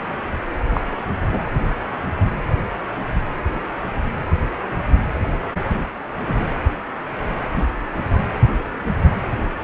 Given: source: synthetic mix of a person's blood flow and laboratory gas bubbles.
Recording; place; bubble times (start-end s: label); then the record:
Doppler ultrasound of blood flow; precordium
0.74-0.81 s: bubbles
1.31-1.42 s: bubbles
6.27-6.33 s: bubbles
6.39-6.46 s: bubbles
7.55-7.63 s: bubbles
From the record:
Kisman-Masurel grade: 122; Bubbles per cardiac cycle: 1 to 2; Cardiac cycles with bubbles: 10 to 50%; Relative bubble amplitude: moderate (0.250 to 0.450); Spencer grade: 2 (many but less than half of the cardiac periods contain bubble signals, singularly or in groups); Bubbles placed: anywhere in the cardiac cycle